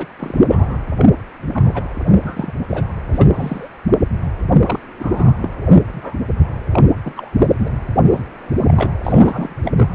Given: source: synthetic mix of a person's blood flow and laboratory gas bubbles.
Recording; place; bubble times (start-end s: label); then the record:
Doppler ultrasound of blood flow; precordium
0.00-0.07 s: bubbles
0.19-0.46 s: bubbles
0.50-0.76 s: bubbles
0.98-1.06 s: bubbles
1.52-1.83 s: bubbles
2.10-2.54 s: bubbles
2.69-2.84 s: bubbles
3.12-3.68 s: bubbles
4.59-4.79 s: bubbles
4.99-5.33 s: bubbles
5.40-5.50 s: bubbles
5.67-5.77 s: bubbles
5.88-6.18 s: bubbles
6.71-6.86 s: bubbles
7.04-7.13 s: bubbles
7.17-7.29 s: bubbles
7.32-7.71 s: bubbles
8.06-8.23 s: bubbles
8.61-8.90 s: bubbles
9.04-9.54 s: bubbles
9.65-9.72 s: bubbles
9.77-9.88 s: bubbles
From the record:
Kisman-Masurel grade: 242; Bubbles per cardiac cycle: several, 3 to 8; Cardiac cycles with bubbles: 100%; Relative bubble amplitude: moderate (0.250 to 0.450); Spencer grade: 3 (all of the cardiac periods contain showers or single bubble signals, but not dominating or overriding the cardiac motion signals); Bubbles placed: anywhere in the cardiac cycle